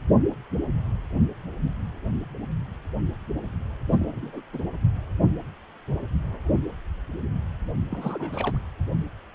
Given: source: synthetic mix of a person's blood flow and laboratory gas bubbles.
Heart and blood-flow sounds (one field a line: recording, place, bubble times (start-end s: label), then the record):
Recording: Doppler ultrasound of blood flow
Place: precordium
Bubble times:
3.89-4.42 s: bubbles
4.53-4.58 s: bubbles
7.90-8.57 s: bubbles
From the record:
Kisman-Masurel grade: 221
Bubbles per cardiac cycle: several, 3 to 8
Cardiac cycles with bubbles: 10 to 50%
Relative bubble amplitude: barely perceptible (0.100 to 0.250)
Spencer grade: 2 (many but less than half of the cardiac periods contain bubble signals, singularly or in groups)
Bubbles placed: anywhere in the cardiac cycle